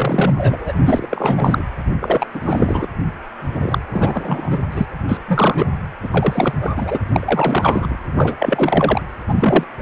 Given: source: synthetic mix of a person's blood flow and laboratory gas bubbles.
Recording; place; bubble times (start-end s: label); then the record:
Doppler ultrasound of blood flow; precordium
0.00-0.73 s: bubbles
0.78-1.07 s: bubbles
1.10-1.65 s: bubbles
1.99-2.27 s: bubbles
2.34-2.87 s: bubbles
3.52-3.78 s: bubbles
3.93-4.61 s: bubbles
4.71-4.86 s: bubbles
5.08-5.19 s: bubbles
5.28-5.66 s: bubbles
6.03-6.54 s: bubbles
6.60-6.99 s: bubbles
7.12-7.97 s: bubbles
8.15-8.37 s: bubbles
8.39-9.02 s: bubbles
9.28-9.64 s: bubbles
9.79-9.82 s: bubbles
From the record:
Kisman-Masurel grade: 343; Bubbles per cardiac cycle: rolling drumbeat, 9 or more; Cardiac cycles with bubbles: 100%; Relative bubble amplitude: loud (0.450 to 0.775); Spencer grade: 3 (all of the cardiac periods contain showers or single bubble signals, but not dominating or overriding the cardiac motion signals); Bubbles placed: anywhere in the cardiac cycle